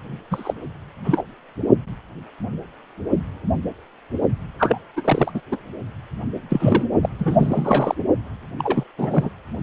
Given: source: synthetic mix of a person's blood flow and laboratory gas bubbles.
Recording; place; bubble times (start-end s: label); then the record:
Doppler ultrasound of blood flow; precordium
0.30-0.53 s: bubbles
1.04-1.23 s: bubbles
4.58-4.81 s: bubbles
4.96-5.01 s: bubbles
5.04-5.31 s: bubbles
5.34-5.41 s: bubbles
5.51-5.58 s: bubbles
6.49-6.87 s: bubbles
7.02-7.09 s: bubbles
7.18-7.95 s: bubbles
8.58-8.84 s: bubbles
8.98-9.29 s: bubbles
From the record:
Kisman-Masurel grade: 233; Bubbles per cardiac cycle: several, 3 to 8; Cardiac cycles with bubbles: 50 to 99%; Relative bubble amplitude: loud (0.450 to 0.775); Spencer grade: 3 (all of the cardiac periods contain showers or single bubble signals, but not dominating or overriding the cardiac motion signals); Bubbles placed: only in the low amplitude regions of the cardiac cycle